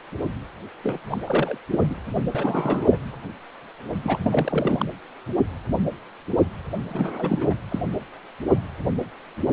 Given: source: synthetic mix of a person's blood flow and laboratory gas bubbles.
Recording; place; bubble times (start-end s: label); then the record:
Doppler ultrasound of blood flow; precordium
0.83-0.99 s: bubbles
1.10-1.17 s: bubbles
1.21-1.58 s: bubbles
1.71-1.96 s: bubbles
2.34-2.97 s: bubbles
4.04-4.86 s: bubbles
6.88-7.54 s: bubbles
7.69-7.81 s: bubbles
From the record:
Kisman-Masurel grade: 332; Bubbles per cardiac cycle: rolling drumbeat, 9 or more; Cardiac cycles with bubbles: 50 to 99%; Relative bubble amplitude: moderate (0.250 to 0.450); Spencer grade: 3 (all of the cardiac periods contain showers or single bubble signals, but not dominating or overriding the cardiac motion signals); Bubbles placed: anywhere in the cardiac cycle